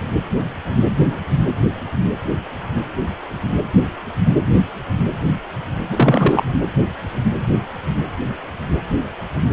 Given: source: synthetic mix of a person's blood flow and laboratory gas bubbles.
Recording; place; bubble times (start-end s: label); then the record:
Doppler ultrasound of blood flow; precordium
5.89-6.43 s: bubbles
From the record:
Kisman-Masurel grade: 213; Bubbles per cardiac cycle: several, 3 to 8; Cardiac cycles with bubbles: 1 to 10%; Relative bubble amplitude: loud (0.450 to 0.775); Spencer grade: 1 (occasional bubble signal discernible with the cardiac motion signal, with majority of cardiac periods free of bubbles); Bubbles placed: anywhere in the cardiac cycle